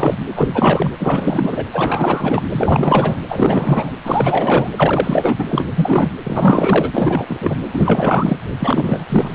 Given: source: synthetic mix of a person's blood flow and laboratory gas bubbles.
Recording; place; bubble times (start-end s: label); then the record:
Doppler ultrasound of blood flow; precordium
0.00-0.16 s: bubbles
0.28-0.48 s: bubbles
0.53-0.92 s: bubbles
0.99-1.65 s: bubbles
1.73-2.42 s: bubbles
2.50-3.21 s: bubbles
3.29-3.92 s: bubbles
4.04-4.71 s: bubbles
4.76-5.35 s: bubbles
5.38-5.46 s: bubbles
5.49-5.68 s: bubbles
5.75-6.13 s: bubbles
6.24-7.58 s: bubbles
7.73-8.38 s: bubbles
8.59-9.06 s: bubbles
9.08-9.35 s: bubbles
From the record:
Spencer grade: 4 (maximum detectable bubble signal sounding continuously throughout systole and diastole of every cardiac period, and overriding the amplitude of the normal cardiac signals); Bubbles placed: anywhere in the cardiac cycle